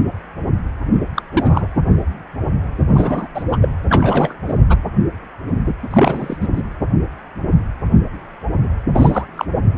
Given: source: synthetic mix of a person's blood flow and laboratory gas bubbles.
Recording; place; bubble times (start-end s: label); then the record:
Doppler ultrasound of blood flow; precordium
1.16-1.23 s: bubbles
1.33-1.68 s: bubbles
2.95-3.27 s: bubbles
3.35-3.44 s: bubbles
3.50-3.69 s: bubbles
3.90-4.33 s: bubbles
4.47-4.54 s: bubbles
4.69-4.77 s: bubbles
5.90-6.37 s: bubbles
6.40-6.47 s: bubbles
6.53-6.63 s: bubbles
8.94-9.26 s: bubbles
9.36-9.45 s: bubbles
From the record:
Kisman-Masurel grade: 223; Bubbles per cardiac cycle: several, 3 to 8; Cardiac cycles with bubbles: 10 to 50%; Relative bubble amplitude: loud (0.450 to 0.775); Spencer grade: 2 (many but less than half of the cardiac periods contain bubble signals, singularly or in groups); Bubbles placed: anywhere in the cardiac cycle